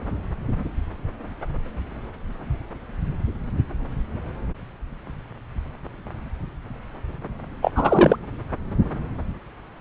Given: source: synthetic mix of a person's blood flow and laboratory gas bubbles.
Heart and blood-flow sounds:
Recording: Doppler ultrasound of blood flow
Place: subclavian vein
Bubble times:
7.62-7.72 s: bubbles
7.75-8.16 s: bubbles
From the record:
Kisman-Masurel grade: 213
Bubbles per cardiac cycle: several, 3 to 8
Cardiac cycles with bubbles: 1 to 10%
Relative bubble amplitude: loud (0.450 to 0.775)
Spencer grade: 1 (occasional bubble signal discernible with the cardiac motion signal, with majority of cardiac periods free of bubbles)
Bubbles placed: anywhere in the cardiac cycle

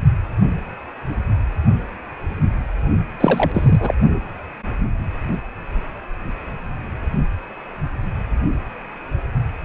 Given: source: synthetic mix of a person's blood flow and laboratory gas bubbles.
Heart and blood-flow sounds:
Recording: Doppler ultrasound of blood flow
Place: precordium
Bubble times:
3.20-3.94 s: bubbles
From the record:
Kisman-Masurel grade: 213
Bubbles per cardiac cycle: several, 3 to 8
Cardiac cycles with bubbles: 1 to 10%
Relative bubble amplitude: loud (0.450 to 0.775)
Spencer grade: 1 (occasional bubble signal discernible with the cardiac motion signal, with majority of cardiac periods free of bubbles)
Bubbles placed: only in the low amplitude regions of the cardiac cycle

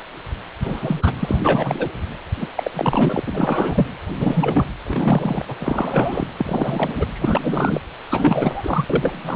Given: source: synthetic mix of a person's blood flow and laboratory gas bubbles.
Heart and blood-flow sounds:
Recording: Doppler ultrasound of blood flow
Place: precordium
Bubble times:
0.62-1.12 s: bubbles
1.19-1.37 s: bubbles
1.43-1.88 s: bubbles
2.40-2.48 s: bubbles
2.55-2.71 s: bubbles
2.73-3.21 s: bubbles
3.27-3.87 s: bubbles
4.20-4.67 s: bubbles
4.83-5.45 s: bubbles
5.48-5.55 s: bubbles
5.59-6.26 s: bubbles
6.38-7.07 s: bubbles
7.13-7.82 s: bubbles
8.11-8.85 s: bubbles
8.90-9.36 s: bubbles
From the record:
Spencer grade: 3 (all of the cardiac periods contain showers or single bubble signals, but not dominating or overriding the cardiac motion signals)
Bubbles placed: anywhere in the cardiac cycle

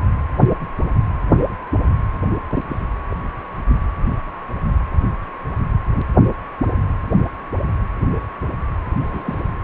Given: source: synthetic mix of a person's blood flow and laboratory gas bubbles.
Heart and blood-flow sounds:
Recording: Doppler ultrasound of blood flow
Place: precordium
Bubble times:
2.55-2.62 s: bubbles
2.69-2.81 s: bubbles
3.10-3.16 s: bubbles
9.00-9.43 s: bubbles
From the record:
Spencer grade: 2 (many but less than half of the cardiac periods contain bubble signals, singularly or in groups)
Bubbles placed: anywhere in the cardiac cycle

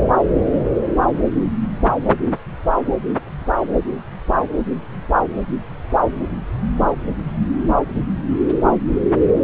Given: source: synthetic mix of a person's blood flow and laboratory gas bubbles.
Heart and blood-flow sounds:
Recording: Doppler ultrasound of blood flow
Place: subclavian vein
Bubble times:
no bubbles
From the record:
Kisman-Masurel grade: 000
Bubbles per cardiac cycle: 0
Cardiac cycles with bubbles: 0%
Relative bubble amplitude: no bubbles discernible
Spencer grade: 0 (complete lack of bubble signals)

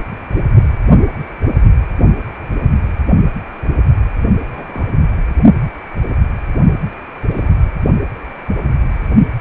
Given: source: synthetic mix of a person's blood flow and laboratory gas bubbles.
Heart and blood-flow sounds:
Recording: Doppler ultrasound of blood flow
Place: precordium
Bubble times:
4.53-4.87 s: bubbles
7.31-7.49 s: bubbles
From the record:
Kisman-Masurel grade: 121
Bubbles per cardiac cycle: 1 to 2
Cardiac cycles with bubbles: 10 to 50%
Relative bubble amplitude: barely perceptible (0.100 to 0.250)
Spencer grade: 2 (many but less than half of the cardiac periods contain bubble signals, singularly or in groups)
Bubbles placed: only in the low amplitude regions of the cardiac cycle

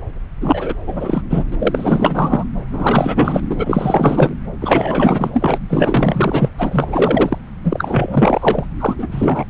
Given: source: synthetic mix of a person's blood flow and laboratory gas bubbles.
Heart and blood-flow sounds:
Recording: Doppler ultrasound of blood flow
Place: subclavian vein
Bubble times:
0.41-0.75 s: bubbles
0.86-1.22 s: bubbles
1.30-1.44 s: bubbles
1.52-1.56 s: bubbles
1.59-2.44 s: bubbles
2.72-3.42 s: bubbles
3.50-4.34 s: bubbles
4.60-5.30 s: bubbles
5.33-5.58 s: bubbles
5.69-6.49 s: bubbles
6.57-7.38 s: bubbles
7.63-8.65 s: bubbles
8.80-8.95 s: bubbles
8.98-9.07 s: bubbles
9.11-9.45 s: bubbles
From the record:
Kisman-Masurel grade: 444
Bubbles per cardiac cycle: continuous sound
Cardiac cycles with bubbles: 100%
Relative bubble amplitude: maximal (0.775 to 0.999)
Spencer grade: 4 (maximum detectable bubble signal sounding continuously throughout systole and diastole of every cardiac period, and overriding the amplitude of the normal cardiac signals)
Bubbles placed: anywhere in the cardiac cycle

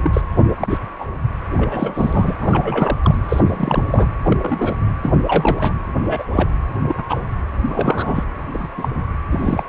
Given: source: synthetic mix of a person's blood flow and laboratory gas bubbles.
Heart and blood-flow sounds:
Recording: Doppler ultrasound of blood flow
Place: precordium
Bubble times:
0.00-0.21 s: bubbles
0.59-0.78 s: bubbles
0.98-1.08 s: bubbles
1.57-2.34 s: bubbles
2.41-2.99 s: bubbles
3.02-3.15 s: bubbles
3.29-3.41 s: bubbles
3.46-4.08 s: bubbles
4.23-4.36 s: bubbles
4.41-4.76 s: bubbles
5.03-5.13 s: bubbles
5.23-5.73 s: bubbles
6.03-6.24 s: bubbles
6.33-6.51 s: bubbles
6.83-7.03 s: bubbles
7.09-7.20 s: bubbles
7.68-8.24 s: bubbles
8.53-8.68 s: bubbles
8.77-8.88 s: bubbles
8.94-9.04 s: bubbles
9.32-9.63 s: bubbles
From the record:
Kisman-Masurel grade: 243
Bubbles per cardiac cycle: several, 3 to 8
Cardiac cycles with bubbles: 100%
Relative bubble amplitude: loud (0.450 to 0.775)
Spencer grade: 3 (all of the cardiac periods contain showers or single bubble signals, but not dominating or overriding the cardiac motion signals)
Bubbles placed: anywhere in the cardiac cycle

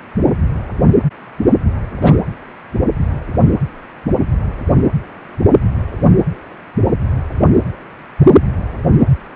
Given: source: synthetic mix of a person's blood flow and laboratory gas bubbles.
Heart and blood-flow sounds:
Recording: Doppler ultrasound of blood flow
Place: precordium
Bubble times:
2.00-2.18 s: bubbles
From the record:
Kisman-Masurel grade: 113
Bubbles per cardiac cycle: 1 to 2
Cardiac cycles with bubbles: 1 to 10%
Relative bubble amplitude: loud (0.450 to 0.775)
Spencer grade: 1 (occasional bubble signal discernible with the cardiac motion signal, with majority of cardiac periods free of bubbles)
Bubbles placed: anywhere in the cardiac cycle

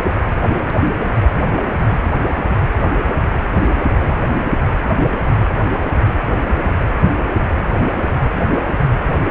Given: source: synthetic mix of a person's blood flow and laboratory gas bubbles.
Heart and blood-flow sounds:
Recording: Doppler ultrasound of blood flow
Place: precordium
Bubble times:
no bubbles
From the record:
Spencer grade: 0 (complete lack of bubble signals)

